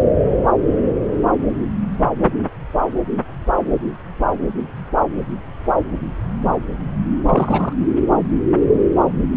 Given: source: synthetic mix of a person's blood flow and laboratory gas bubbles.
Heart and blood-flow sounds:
Doppler ultrasound of blood flow; subclavian vein
0.00-0.05 s: bubbles
7.29-7.73 s: bubbles
From the record:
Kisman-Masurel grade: 113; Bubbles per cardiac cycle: 1 to 2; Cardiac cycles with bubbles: 1 to 10%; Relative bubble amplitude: loud (0.450 to 0.775); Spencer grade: 1 (occasional bubble signal discernible with the cardiac motion signal, with majority of cardiac periods free of bubbles); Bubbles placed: anywhere in the cardiac cycle

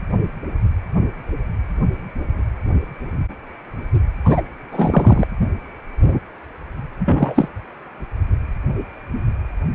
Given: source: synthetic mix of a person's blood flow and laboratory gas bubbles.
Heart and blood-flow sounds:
Doppler ultrasound of blood flow; precordium
4.24-4.42 s: bubbles
4.71-5.27 s: bubbles
7.05-7.48 s: bubbles
From the record:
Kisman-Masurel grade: 223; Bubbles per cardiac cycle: several, 3 to 8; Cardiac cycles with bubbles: 10 to 50%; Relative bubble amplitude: loud (0.450 to 0.775); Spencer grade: 2 (many but less than half of the cardiac periods contain bubble signals, singularly or in groups); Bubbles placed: anywhere in the cardiac cycle

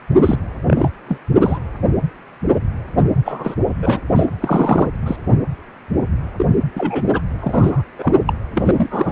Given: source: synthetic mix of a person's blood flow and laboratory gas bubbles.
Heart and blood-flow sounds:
Doppler ultrasound of blood flow; precordium
0.25-0.39 s: bubbles
0.67-0.90 s: bubbles
1.08-1.20 s: bubbles
1.41-1.58 s: bubbles
2.97-3.02 s: bubbles
3.25-3.54 s: bubbles
3.82-4.00 s: bubbles
4.14-4.26 s: bubbles
4.41-4.88 s: bubbles
5.06-5.16 s: bubbles
6.38-6.46 s: bubbles
6.75-7.05 s: bubbles
7.13-7.21 s: bubbles
7.40-7.82 s: bubbles
7.98-8.13 s: bubbles
8.27-8.33 s: bubbles
8.55-9.12 s: bubbles
From the record:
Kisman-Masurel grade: 232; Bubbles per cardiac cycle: several, 3 to 8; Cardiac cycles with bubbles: 50 to 99%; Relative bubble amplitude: moderate (0.250 to 0.450); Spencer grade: 3 (all of the cardiac periods contain showers or single bubble signals, but not dominating or overriding the cardiac motion signals); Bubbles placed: anywhere in the cardiac cycle

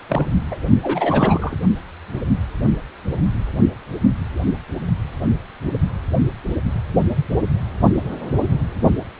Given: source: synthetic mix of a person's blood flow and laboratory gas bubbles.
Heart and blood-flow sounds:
Doppler ultrasound of blood flow; precordium
0.09-0.26 s: bubbles
0.50-0.57 s: bubbles
0.82-1.57 s: bubbles
From the record:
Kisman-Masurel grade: 223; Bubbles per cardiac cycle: several, 3 to 8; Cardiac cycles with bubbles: 10 to 50%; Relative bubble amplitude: loud (0.450 to 0.775); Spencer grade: 2 (many but less than half of the cardiac periods contain bubble signals, singularly or in groups); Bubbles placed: only in the low amplitude regions of the cardiac cycle

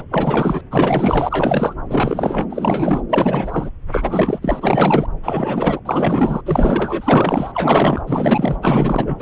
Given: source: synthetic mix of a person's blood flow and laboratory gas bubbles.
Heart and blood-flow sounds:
Doppler ultrasound of blood flow; subclavian vein
0.00-0.04 s: bubbles
0.10-0.61 s: bubbles
0.70-1.75 s: bubbles
1.88-2.47 s: bubbles
2.50-3.02 s: bubbles
3.09-3.70 s: bubbles
3.92-5.07 s: bubbles
5.23-5.80 s: bubbles
5.85-6.41 s: bubbles
6.46-8.02 s: bubbles
8.07-8.57 s: bubbles
8.61-9.22 s: bubbles
From the record:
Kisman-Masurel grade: 444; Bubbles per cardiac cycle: continuous sound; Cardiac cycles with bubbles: 100%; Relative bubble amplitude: maximal (0.775 to 0.999); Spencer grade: 4 (maximum detectable bubble signal sounding continuously throughout systole and diastole of every cardiac period, and overriding the amplitude of the normal cardiac signals); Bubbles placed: anywhere in the cardiac cycle

